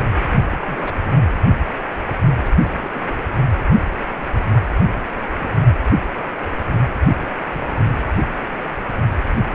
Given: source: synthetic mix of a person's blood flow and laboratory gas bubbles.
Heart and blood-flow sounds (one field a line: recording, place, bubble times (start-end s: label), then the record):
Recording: Doppler ultrasound of blood flow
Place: precordium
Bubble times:
0.46-1.19 s: bubbles
2.40-2.52 s: bubbles
2.71-3.13 s: bubbles
4.81-4.97 s: bubbles
5.32-5.56 s: bubbles
7.21-7.26 s: bubbles
7.42-7.99 s: bubbles
From the record:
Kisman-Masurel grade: 221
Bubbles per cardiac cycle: several, 3 to 8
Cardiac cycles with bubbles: 10 to 50%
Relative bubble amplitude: barely perceptible (0.100 to 0.250)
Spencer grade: 2 (many but less than half of the cardiac periods contain bubble signals, singularly or in groups)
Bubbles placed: anywhere in the cardiac cycle